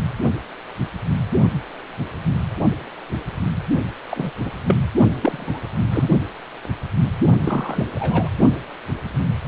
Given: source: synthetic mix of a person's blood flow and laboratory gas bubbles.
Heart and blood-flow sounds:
Doppler ultrasound of blood flow; precordium
4.10-4.31 s: bubbles
4.45-4.52 s: bubbles
4.67-4.76 s: bubbles
5.21-5.61 s: bubbles
5.92-6.08 s: bubbles
7.45-7.85 s: bubbles
7.95-8.29 s: bubbles
From the record:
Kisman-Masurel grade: 222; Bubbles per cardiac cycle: several, 3 to 8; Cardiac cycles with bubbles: 10 to 50%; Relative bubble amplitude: moderate (0.250 to 0.450); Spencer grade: 2 (many but less than half of the cardiac periods contain bubble signals, singularly or in groups); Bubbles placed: only in the low amplitude regions of the cardiac cycle

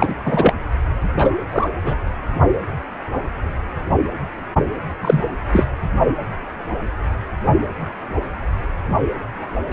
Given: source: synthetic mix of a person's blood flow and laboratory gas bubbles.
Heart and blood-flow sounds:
Doppler ultrasound of blood flow; precordium
0.00-0.14 s: bubbles
0.25-0.54 s: bubbles
1.17-1.35 s: bubbles
1.51-1.69 s: bubbles
1.73-1.96 s: bubbles
5.01-5.22 s: bubbles
5.52-5.66 s: bubbles
9.70-9.73 s: bubbles
From the record:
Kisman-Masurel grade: 233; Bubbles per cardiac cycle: several, 3 to 8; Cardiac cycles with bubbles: 50 to 99%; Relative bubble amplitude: loud (0.450 to 0.775); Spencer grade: 3 (all of the cardiac periods contain showers or single bubble signals, but not dominating or overriding the cardiac motion signals); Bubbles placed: only in the low amplitude regions of the cardiac cycle

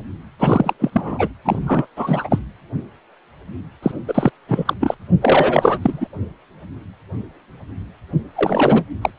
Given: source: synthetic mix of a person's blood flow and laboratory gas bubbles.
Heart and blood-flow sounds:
Doppler ultrasound of blood flow; precordium
0.40-0.74 s: bubbles
0.79-1.28 s: bubbles
1.45-1.86 s: bubbles
1.96-2.39 s: bubbles
3.82-3.91 s: bubbles
4.07-4.30 s: bubbles
4.48-4.73 s: bubbles
4.80-4.94 s: bubbles
5.21-6.07 s: bubbles
8.35-8.87 s: bubbles
9.01-9.11 s: bubbles
From the record:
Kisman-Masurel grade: 333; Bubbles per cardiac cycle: rolling drumbeat, 9 or more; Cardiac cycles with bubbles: 50 to 99%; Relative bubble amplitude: loud (0.450 to 0.775); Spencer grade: 3 (all of the cardiac periods contain showers or single bubble signals, but not dominating or overriding the cardiac motion signals); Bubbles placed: anywhere in the cardiac cycle

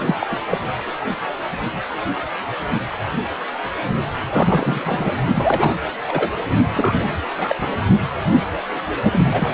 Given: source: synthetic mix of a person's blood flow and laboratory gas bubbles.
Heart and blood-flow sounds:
Doppler ultrasound of blood flow; precordium
0.06-0.15 s: bubbles
0.20-0.27 s: bubbles
0.31-0.41 s: bubbles
0.51-0.58 s: bubbles
4.30-5.12 s: bubbles
5.34-5.74 s: bubbles
6.07-6.31 s: bubbles
6.71-7.12 s: bubbles
7.38-7.55 s: bubbles
7.58-7.68 s: bubbles
9.12-9.54 s: bubbles
From the record:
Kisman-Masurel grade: 232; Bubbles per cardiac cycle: several, 3 to 8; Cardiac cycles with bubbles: 50 to 99%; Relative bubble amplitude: moderate (0.250 to 0.450); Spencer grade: 3 (all of the cardiac periods contain showers or single bubble signals, but not dominating or overriding the cardiac motion signals); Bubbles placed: only in the low amplitude regions of the cardiac cycle

